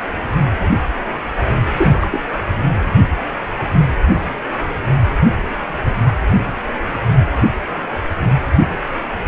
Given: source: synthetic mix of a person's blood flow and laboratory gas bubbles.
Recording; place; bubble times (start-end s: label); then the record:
Doppler ultrasound of blood flow; precordium
1.76-2.08 s: bubbles
2.10-2.21 s: bubbles
From the record:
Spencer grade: 1 (occasional bubble signal discernible with the cardiac motion signal, with majority of cardiac periods free of bubbles); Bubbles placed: anywhere in the cardiac cycle